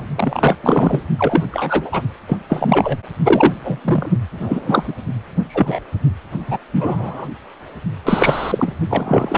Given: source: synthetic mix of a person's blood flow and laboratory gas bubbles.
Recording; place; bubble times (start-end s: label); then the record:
Doppler ultrasound of blood flow; precordium
0.00-0.06 s: bubbles
0.15-0.55 s: bubbles
0.63-1.00 s: bubbles
1.17-1.45 s: bubbles
1.51-2.02 s: bubbles
2.27-2.38 s: bubbles
2.49-2.98 s: bubbles
3.25-3.54 s: bubbles
3.64-3.80 s: bubbles
3.84-4.11 s: bubbles
4.31-4.94 s: bubbles
5.49-5.79 s: bubbles
6.47-6.58 s: bubbles
6.72-7.27 s: bubbles
8.04-8.73 s: bubbles
8.89-9.37 s: bubbles
From the record:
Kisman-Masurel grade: 243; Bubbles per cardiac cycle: several, 3 to 8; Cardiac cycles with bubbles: 100%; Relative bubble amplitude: loud (0.450 to 0.775); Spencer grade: 3 (all of the cardiac periods contain showers or single bubble signals, but not dominating or overriding the cardiac motion signals); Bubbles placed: only in the low amplitude regions of the cardiac cycle